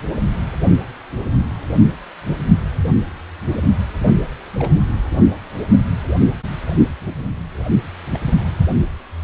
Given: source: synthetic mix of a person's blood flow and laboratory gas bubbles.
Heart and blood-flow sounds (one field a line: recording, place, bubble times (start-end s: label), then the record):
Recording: Doppler ultrasound of blood flow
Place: precordium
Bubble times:
4.07-4.12 s: bubbles
4.59-4.73 s: bubbles
8.12-8.19 s: bubbles
From the record:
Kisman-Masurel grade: 121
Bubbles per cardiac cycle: 1 to 2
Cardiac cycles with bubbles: 10 to 50%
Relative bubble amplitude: barely perceptible (0.100 to 0.250)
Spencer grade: 2 (many but less than half of the cardiac periods contain bubble signals, singularly or in groups)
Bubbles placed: anywhere in the cardiac cycle